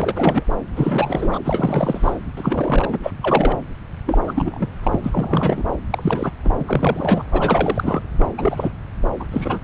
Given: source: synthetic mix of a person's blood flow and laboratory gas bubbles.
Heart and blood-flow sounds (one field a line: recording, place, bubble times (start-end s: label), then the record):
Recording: Doppler ultrasound of blood flow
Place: subclavian vein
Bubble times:
0.00-0.43 s: bubbles
0.76-1.39 s: bubbles
1.44-2.18 s: bubbles
2.36-2.98 s: bubbles
3.02-3.11 s: bubbles
3.22-3.57 s: bubbles
4.06-4.18 s: bubbles
4.27-4.69 s: bubbles
4.83-5.00 s: bubbles
5.04-5.64 s: bubbles
5.90-6.31 s: bubbles
6.45-6.51 s: bubbles
6.59-6.65 s: bubbles
6.68-7.23 s: bubbles
7.31-8.01 s: bubbles
8.18-8.26 s: bubbles
8.38-8.71 s: bubbles
9.20-9.26 s: bubbles
9.31-9.59 s: bubbles
From the record:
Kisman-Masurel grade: 342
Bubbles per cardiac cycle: rolling drumbeat, 9 or more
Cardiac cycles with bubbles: 100%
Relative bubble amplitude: moderate (0.250 to 0.450)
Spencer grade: 3 (all of the cardiac periods contain showers or single bubble signals, but not dominating or overriding the cardiac motion signals)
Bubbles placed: anywhere in the cardiac cycle